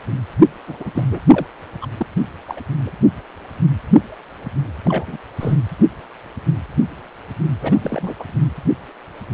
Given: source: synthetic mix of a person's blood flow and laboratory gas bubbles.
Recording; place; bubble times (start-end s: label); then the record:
Doppler ultrasound of blood flow; precordium
0.67-0.77 s: bubbles
0.80-0.92 s: bubbles
0.94-1.04 s: bubbles
1.11-1.20 s: bubbles
1.28-1.46 s: bubbles
1.81-1.88 s: bubbles
1.97-2.06 s: bubbles
2.46-2.60 s: bubbles
2.81-2.90 s: bubbles
4.84-5.17 s: bubbles
5.40-5.57 s: bubbles
7.61-7.78 s: bubbles
7.81-8.15 s: bubbles
8.19-8.24 s: bubbles
From the record:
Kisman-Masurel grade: 232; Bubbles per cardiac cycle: several, 3 to 8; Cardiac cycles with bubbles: 50 to 99%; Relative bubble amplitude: moderate (0.250 to 0.450); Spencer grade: 3 (all of the cardiac periods contain showers or single bubble signals, but not dominating or overriding the cardiac motion signals); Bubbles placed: anywhere in the cardiac cycle